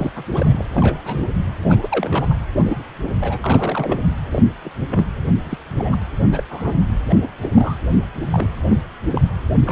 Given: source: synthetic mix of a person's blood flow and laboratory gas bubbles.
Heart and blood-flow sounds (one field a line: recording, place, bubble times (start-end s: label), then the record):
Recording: Doppler ultrasound of blood flow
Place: precordium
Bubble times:
0.00-0.12 s: bubbles
0.16-0.23 s: bubbles
0.27-0.65 s: bubbles
0.72-1.25 s: bubbles
1.69-2.35 s: bubbles
2.65-2.83 s: bubbles
3.02-3.16 s: bubbles
3.21-3.39 s: bubbles
3.42-4.07 s: bubbles
4.31-4.43 s: bubbles
4.64-4.70 s: bubbles
4.90-5.08 s: bubbles
5.44-5.58 s: bubbles
5.79-5.97 s: bubbles
6.31-6.43 s: bubbles
6.50-6.72 s: bubbles
7.09-7.28 s: bubbles
7.41-7.76 s: bubbles
8.30-8.50 s: bubbles
8.70-8.77 s: bubbles
9.12-9.21 s: bubbles
9.65-9.72 s: bubbles
From the record:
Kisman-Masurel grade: 242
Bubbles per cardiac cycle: several, 3 to 8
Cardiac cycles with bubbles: 100%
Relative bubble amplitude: moderate (0.250 to 0.450)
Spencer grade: 3 (all of the cardiac periods contain showers or single bubble signals, but not dominating or overriding the cardiac motion signals)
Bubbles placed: anywhere in the cardiac cycle